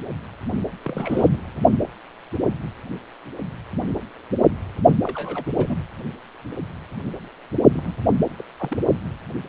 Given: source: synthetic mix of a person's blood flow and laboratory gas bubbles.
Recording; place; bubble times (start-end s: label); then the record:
Doppler ultrasound of blood flow; precordium
0.82-1.29 s: bubbles
1.32-1.42 s: bubbles
5.03-5.44 s: bubbles
5.52-5.76 s: bubbles
7.73-7.95 s: bubbles
8.09-8.12 s: bubbles
8.37-8.45 s: bubbles
8.59-8.78 s: bubbles
From the record:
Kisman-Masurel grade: 221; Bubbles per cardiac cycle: several, 3 to 8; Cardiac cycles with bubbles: 10 to 50%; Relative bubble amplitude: barely perceptible (0.100 to 0.250); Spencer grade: 2 (many but less than half of the cardiac periods contain bubble signals, singularly or in groups); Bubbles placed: only in the low amplitude regions of the cardiac cycle